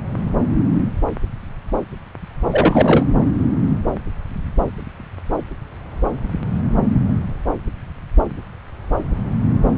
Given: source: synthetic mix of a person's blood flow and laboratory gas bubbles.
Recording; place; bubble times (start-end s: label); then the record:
Doppler ultrasound of blood flow; subclavian vein
2.51-3.05 s: bubbles
From the record:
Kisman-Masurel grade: 213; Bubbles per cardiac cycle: several, 3 to 8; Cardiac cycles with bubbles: 1 to 10%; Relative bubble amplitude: loud (0.450 to 0.775); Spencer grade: 1 (occasional bubble signal discernible with the cardiac motion signal, with majority of cardiac periods free of bubbles); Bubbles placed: anywhere in the cardiac cycle